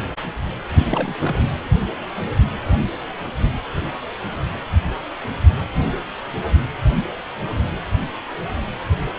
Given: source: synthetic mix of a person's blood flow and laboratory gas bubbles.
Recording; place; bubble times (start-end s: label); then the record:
Doppler ultrasound of blood flow; precordium
0.70-1.15 s: bubbles
1.19-1.52 s: bubbles
From the record:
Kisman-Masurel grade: 212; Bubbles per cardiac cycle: several, 3 to 8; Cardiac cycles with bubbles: 1 to 10%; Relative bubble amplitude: moderate (0.250 to 0.450); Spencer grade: 1 (occasional bubble signal discernible with the cardiac motion signal, with majority of cardiac periods free of bubbles); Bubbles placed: anywhere in the cardiac cycle